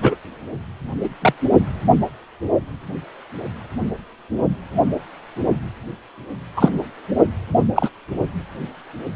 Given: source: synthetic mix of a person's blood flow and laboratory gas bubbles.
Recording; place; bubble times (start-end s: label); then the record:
Doppler ultrasound of blood flow; precordium
0.02-0.15 s: bubbles
1.03-1.09 s: bubbles
1.22-1.33 s: bubbles
6.56-6.69 s: bubbles
7.75-7.89 s: bubbles
From the record:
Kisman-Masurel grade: 123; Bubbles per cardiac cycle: 1 to 2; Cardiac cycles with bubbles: 10 to 50%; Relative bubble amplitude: loud (0.450 to 0.775); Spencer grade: 2 (many but less than half of the cardiac periods contain bubble signals, singularly or in groups); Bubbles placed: only in the low amplitude regions of the cardiac cycle